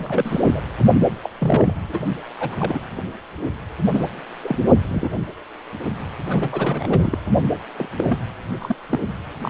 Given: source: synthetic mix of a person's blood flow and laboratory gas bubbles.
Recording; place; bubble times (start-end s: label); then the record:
Doppler ultrasound of blood flow; precordium
0.00-0.41 s: bubbles
0.46-0.62 s: bubbles
1.23-1.30 s: bubbles
1.39-1.84 s: bubbles
1.89-1.99 s: bubbles
2.40-3.02 s: bubbles
3.94-4.08 s: bubbles
4.44-4.65 s: bubbles
4.89-5.09 s: bubbles
6.27-7.18 s: bubbles
7.78-7.87 s: bubbles
7.97-8.04 s: bubbles
8.07-8.18 s: bubbles
8.60-8.76 s: bubbles
8.89-9.00 s: bubbles
9.41-9.50 s: bubbles
From the record:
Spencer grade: 3 (all of the cardiac periods contain showers or single bubble signals, but not dominating or overriding the cardiac motion signals); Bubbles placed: only in the low amplitude regions of the cardiac cycle